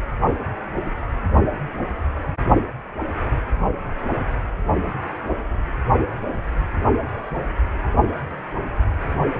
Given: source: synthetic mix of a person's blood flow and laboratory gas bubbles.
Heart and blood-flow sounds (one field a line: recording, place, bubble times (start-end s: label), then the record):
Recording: Doppler ultrasound of blood flow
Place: precordium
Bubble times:
4.82-4.92 s: bubbles
From the record:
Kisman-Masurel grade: 111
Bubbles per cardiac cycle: 1 to 2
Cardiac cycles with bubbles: 1 to 10%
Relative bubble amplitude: barely perceptible (0.100 to 0.250)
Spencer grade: 1 (occasional bubble signal discernible with the cardiac motion signal, with majority of cardiac periods free of bubbles)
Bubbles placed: anywhere in the cardiac cycle